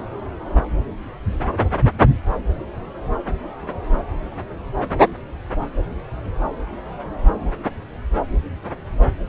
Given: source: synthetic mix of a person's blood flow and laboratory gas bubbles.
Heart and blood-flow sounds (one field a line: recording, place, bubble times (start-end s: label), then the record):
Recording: Doppler ultrasound of blood flow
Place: subclavian vein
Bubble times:
no bubbles
From the record:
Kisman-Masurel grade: 000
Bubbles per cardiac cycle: 0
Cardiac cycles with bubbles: 0%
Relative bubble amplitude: no bubbles discernible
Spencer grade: 0 (complete lack of bubble signals)